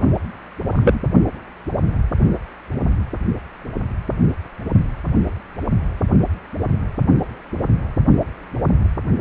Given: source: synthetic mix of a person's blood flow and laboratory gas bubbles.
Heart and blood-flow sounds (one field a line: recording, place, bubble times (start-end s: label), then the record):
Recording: Doppler ultrasound of blood flow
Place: precordium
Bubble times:
0.72-1.01 s: bubbles
From the record:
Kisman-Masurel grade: 113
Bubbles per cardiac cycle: 1 to 2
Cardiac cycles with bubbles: 1 to 10%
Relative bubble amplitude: loud (0.450 to 0.775)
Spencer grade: 1 (occasional bubble signal discernible with the cardiac motion signal, with majority of cardiac periods free of bubbles)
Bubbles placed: anywhere in the cardiac cycle